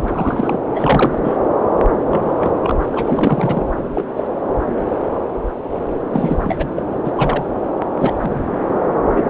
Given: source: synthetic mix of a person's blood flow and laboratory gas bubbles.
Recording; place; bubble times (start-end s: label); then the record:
Doppler ultrasound of blood flow; subclavian vein
0.00-0.58 s: bubbles
0.75-1.19 s: bubbles
1.23-1.37 s: bubbles
2.10-2.54 s: bubbles
2.63-2.71 s: bubbles
2.93-3.65 s: bubbles
3.94-4.04 s: bubbles
4.16-4.28 s: bubbles
6.10-6.71 s: bubbles
6.76-6.83 s: bubbles
7.05-7.12 s: bubbles
7.14-7.45 s: bubbles
7.97-8.13 s: bubbles
8.20-8.51 s: bubbles
9.15-9.30 s: bubbles
From the record:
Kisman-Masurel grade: 232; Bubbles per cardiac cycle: several, 3 to 8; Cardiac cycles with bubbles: 50 to 99%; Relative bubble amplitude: moderate (0.250 to 0.450); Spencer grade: 3 (all of the cardiac periods contain showers or single bubble signals, but not dominating or overriding the cardiac motion signals); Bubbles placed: anywhere in the cardiac cycle